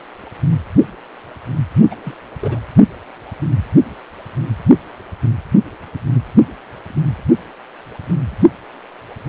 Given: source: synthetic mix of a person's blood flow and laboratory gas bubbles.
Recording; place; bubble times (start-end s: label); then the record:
Doppler ultrasound of blood flow; precordium
1.90-1.96 s: bubbles
2.02-2.17 s: bubbles
2.40-2.60 s: bubbles
From the record:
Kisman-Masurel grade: 221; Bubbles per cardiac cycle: several, 3 to 8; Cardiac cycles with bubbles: 10 to 50%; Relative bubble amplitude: barely perceptible (0.100 to 0.250); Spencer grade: 2 (many but less than half of the cardiac periods contain bubble signals, singularly or in groups); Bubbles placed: anywhere in the cardiac cycle